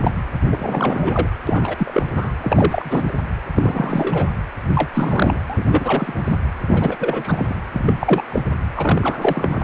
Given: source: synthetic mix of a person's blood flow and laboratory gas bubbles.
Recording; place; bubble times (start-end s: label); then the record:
Doppler ultrasound of blood flow; precordium
0.04-0.12 s: bubbles
0.52-1.29 s: bubbles
1.47-2.06 s: bubbles
2.16-2.32 s: bubbles
2.41-3.12 s: bubbles
3.56-4.29 s: bubbles
4.75-4.90 s: bubbles
4.94-5.38 s: bubbles
5.50-5.65 s: bubbles
5.71-6.36 s: bubbles
6.67-6.96 s: bubbles
7.00-7.56 s: bubbles
7.73-7.93 s: bubbles
8.00-8.22 s: bubbles
8.32-8.43 s: bubbles
8.76-9.64 s: bubbles
From the record:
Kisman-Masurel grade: 343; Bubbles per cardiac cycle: rolling drumbeat, 9 or more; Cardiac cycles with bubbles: 100%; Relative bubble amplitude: loud (0.450 to 0.775); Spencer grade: 3 (all of the cardiac periods contain showers or single bubble signals, but not dominating or overriding the cardiac motion signals); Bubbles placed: anywhere in the cardiac cycle